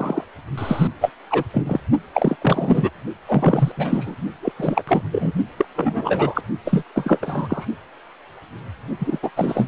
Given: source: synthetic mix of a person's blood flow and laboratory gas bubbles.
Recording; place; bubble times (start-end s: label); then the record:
Doppler ultrasound of blood flow; precordium
0.00-0.24 s: bubbles
0.57-0.88 s: bubbles
1.00-1.12 s: bubbles
1.30-1.44 s: bubbles
1.53-1.64 s: bubbles
1.66-1.81 s: bubbles
2.14-2.36 s: bubbles
2.42-2.90 s: bubbles
3.27-3.72 s: bubbles
3.77-4.15 s: bubbles
4.42-4.52 s: bubbles
4.57-4.83 s: bubbles
4.87-5.03 s: bubbles
5.11-5.33 s: bubbles
5.57-5.65 s: bubbles
5.76-6.41 s: bubbles
6.65-6.83 s: bubbles
6.95-7.66 s: bubbles
8.99-9.19 s: bubbles
9.22-9.30 s: bubbles
9.36-9.68 s: bubbles
From the record:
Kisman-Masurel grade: 333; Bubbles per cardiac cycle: rolling drumbeat, 9 or more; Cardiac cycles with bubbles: 50 to 99%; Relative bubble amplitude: loud (0.450 to 0.775); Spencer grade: 3 (all of the cardiac periods contain showers or single bubble signals, but not dominating or overriding the cardiac motion signals); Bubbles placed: only in the low amplitude regions of the cardiac cycle